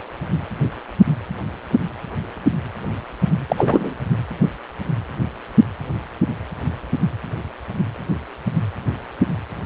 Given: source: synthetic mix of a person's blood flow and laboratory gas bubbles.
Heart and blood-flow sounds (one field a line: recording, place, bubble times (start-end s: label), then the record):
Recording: Doppler ultrasound of blood flow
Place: precordium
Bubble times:
3.48-3.94 s: bubbles
From the record:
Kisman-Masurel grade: 213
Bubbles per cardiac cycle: several, 3 to 8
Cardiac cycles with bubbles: 1 to 10%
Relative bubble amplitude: loud (0.450 to 0.775)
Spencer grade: 1 (occasional bubble signal discernible with the cardiac motion signal, with majority of cardiac periods free of bubbles)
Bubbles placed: anywhere in the cardiac cycle